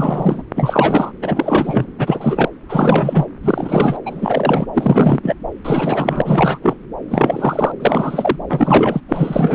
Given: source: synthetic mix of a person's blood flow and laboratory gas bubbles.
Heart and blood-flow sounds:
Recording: Doppler ultrasound of blood flow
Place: subclavian vein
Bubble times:
0.00-0.42 s: bubbles
0.55-1.11 s: bubbles
1.22-1.86 s: bubbles
1.99-2.49 s: bubbles
2.69-3.26 s: bubbles
3.42-3.99 s: bubbles
4.06-4.66 s: bubbles
4.74-5.20 s: bubbles
5.23-5.34 s: bubbles
5.65-6.22 s: bubbles
6.25-6.58 s: bubbles
6.62-6.77 s: bubbles
7.08-7.72 s: bubbles
7.79-8.36 s: bubbles
8.49-9.00 s: bubbles
9.08-9.55 s: bubbles
From the record:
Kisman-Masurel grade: 343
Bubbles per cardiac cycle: rolling drumbeat, 9 or more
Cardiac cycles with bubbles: 100%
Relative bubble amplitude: loud (0.450 to 0.775)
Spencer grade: 3 (all of the cardiac periods contain showers or single bubble signals, but not dominating or overriding the cardiac motion signals)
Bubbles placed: anywhere in the cardiac cycle

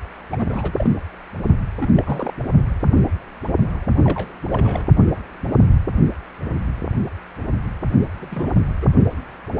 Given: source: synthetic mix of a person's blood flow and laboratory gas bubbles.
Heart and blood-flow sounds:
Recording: Doppler ultrasound of blood flow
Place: precordium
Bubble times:
0.32-0.46 s: bubbles
0.49-0.72 s: bubbles
0.76-0.89 s: bubbles
1.79-1.90 s: bubbles
1.96-2.33 s: bubbles
4.04-4.32 s: bubbles
4.51-4.89 s: bubbles
8.17-8.60 s: bubbles
8.81-8.86 s: bubbles
From the record:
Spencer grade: 2 (many but less than half of the cardiac periods contain bubble signals, singularly or in groups)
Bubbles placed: only in the low amplitude regions of the cardiac cycle

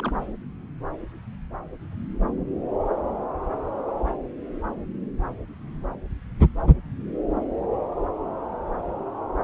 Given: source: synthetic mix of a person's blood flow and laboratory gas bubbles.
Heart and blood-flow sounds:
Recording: Doppler ultrasound of blood flow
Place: subclavian vein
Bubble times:
0.00-0.12 s: bubbles
From the record:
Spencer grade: 1 (occasional bubble signal discernible with the cardiac motion signal, with majority of cardiac periods free of bubbles)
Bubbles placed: anywhere in the cardiac cycle

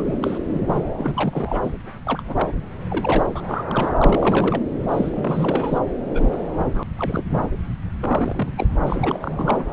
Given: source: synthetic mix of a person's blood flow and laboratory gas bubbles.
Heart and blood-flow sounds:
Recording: Doppler ultrasound of blood flow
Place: subclavian vein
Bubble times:
0.00-0.03 s: bubbles
0.05-0.18 s: bubbles
0.20-0.83 s: bubbles
0.98-1.73 s: bubbles
2.06-2.23 s: bubbles
2.26-2.52 s: bubbles
2.89-3.29 s: bubbles
3.35-3.41 s: bubbles
3.47-3.64 s: bubbles
3.70-3.91 s: bubbles
3.98-4.62 s: bubbles
4.88-5.79 s: bubbles
6.13-6.83 s: bubbles
6.98-7.24 s: bubbles
7.29-7.48 s: bubbles
8.01-8.51 s: bubbles
8.57-8.69 s: bubbles
8.80-9.17 s: bubbles
9.21-9.66 s: bubbles
9.71-9.73 s: bubbles
From the record:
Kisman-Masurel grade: 342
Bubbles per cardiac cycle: rolling drumbeat, 9 or more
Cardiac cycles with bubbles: 100%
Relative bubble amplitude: moderate (0.250 to 0.450)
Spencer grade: 3 (all of the cardiac periods contain showers or single bubble signals, but not dominating or overriding the cardiac motion signals)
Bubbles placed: anywhere in the cardiac cycle

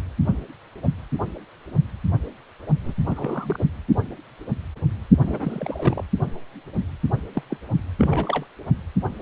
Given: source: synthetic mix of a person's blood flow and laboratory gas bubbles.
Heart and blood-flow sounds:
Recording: Doppler ultrasound of blood flow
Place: precordium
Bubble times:
2.84-2.94 s: bubbles
3.08-3.65 s: bubbles
5.21-6.04 s: bubbles
7.34-7.42 s: bubbles
7.50-7.57 s: bubbles
7.98-8.46 s: bubbles
From the record:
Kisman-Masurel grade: 222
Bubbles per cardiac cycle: several, 3 to 8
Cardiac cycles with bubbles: 10 to 50%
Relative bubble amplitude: moderate (0.250 to 0.450)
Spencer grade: 2 (many but less than half of the cardiac periods contain bubble signals, singularly or in groups)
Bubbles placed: only in the low amplitude regions of the cardiac cycle

